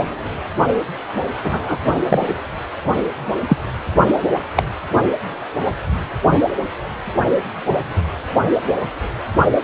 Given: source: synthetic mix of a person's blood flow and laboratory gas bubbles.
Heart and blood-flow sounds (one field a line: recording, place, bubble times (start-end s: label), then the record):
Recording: Doppler ultrasound of blood flow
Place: precordium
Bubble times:
1.43-1.77 s: bubbles
2.08-2.29 s: bubbles
3.48-3.57 s: bubbles
4.56-4.63 s: bubbles
From the record:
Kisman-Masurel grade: 123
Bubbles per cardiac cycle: 1 to 2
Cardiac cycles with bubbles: 10 to 50%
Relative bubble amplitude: loud (0.450 to 0.775)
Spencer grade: 2 (many but less than half of the cardiac periods contain bubble signals, singularly or in groups)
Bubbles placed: only in the low amplitude regions of the cardiac cycle